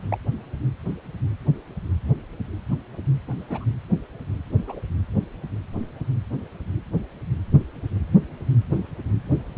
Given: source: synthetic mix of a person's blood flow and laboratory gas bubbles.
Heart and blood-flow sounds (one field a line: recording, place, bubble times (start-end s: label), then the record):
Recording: Doppler ultrasound of blood flow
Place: precordium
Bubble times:
0.10-0.18 s: bubbles
3.48-3.65 s: bubbles
4.67-4.79 s: bubbles
From the record:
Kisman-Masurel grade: 121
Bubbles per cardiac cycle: 1 to 2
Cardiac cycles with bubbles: 10 to 50%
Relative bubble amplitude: barely perceptible (0.100 to 0.250)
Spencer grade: 2 (many but less than half of the cardiac periods contain bubble signals, singularly or in groups)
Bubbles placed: only in the low amplitude regions of the cardiac cycle